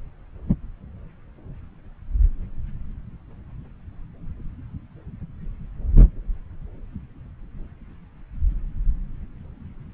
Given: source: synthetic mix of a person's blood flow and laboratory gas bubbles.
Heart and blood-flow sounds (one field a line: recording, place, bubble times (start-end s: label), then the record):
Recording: Doppler ultrasound of blood flow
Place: subclavian vein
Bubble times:
no bubbles
From the record:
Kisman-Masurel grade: 000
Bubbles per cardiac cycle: 0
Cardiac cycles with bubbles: 0%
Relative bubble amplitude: no bubbles discernible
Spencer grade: 0 (complete lack of bubble signals)